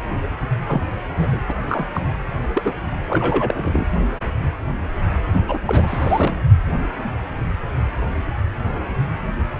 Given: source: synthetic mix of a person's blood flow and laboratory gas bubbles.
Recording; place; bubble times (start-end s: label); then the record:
Doppler ultrasound of blood flow; precordium
0.68-0.81 s: bubbles
1.17-1.45 s: bubbles
1.48-1.54 s: bubbles
1.67-1.87 s: bubbles
1.94-2.01 s: bubbles
2.54-2.74 s: bubbles
3.08-3.87 s: bubbles
5.48-5.58 s: bubbles
5.66-6.39 s: bubbles
From the record:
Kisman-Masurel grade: 222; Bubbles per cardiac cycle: several, 3 to 8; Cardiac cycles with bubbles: 10 to 50%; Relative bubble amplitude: moderate (0.250 to 0.450); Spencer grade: 2 (many but less than half of the cardiac periods contain bubble signals, singularly or in groups); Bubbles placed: only in the low amplitude regions of the cardiac cycle